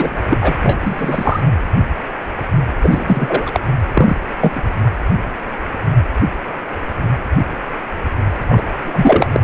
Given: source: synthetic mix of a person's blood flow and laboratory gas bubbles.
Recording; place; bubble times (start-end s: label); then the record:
Doppler ultrasound of blood flow; precordium
0.00-0.19 s: bubbles
0.29-0.37 s: bubbles
0.40-0.54 s: bubbles
0.62-1.40 s: bubbles
2.78-3.60 s: bubbles
3.93-4.17 s: bubbles
4.41-4.53 s: bubbles
4.55-4.61 s: bubbles
8.49-8.63 s: bubbles
8.82-9.28 s: bubbles
9.34-9.40 s: bubbles
From the record:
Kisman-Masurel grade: 223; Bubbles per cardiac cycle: several, 3 to 8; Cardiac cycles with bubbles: 10 to 50%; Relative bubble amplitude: loud (0.450 to 0.775); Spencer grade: 2 (many but less than half of the cardiac periods contain bubble signals, singularly or in groups); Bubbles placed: anywhere in the cardiac cycle